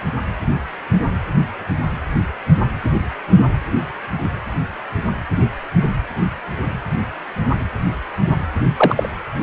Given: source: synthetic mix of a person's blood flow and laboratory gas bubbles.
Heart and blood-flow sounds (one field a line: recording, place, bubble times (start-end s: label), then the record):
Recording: Doppler ultrasound of blood flow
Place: precordium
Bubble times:
8.78-9.09 s: bubbles
From the record:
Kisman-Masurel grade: 113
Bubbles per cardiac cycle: 1 to 2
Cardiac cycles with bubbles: 1 to 10%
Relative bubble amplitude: loud (0.450 to 0.775)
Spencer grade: 1 (occasional bubble signal discernible with the cardiac motion signal, with majority of cardiac periods free of bubbles)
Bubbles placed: anywhere in the cardiac cycle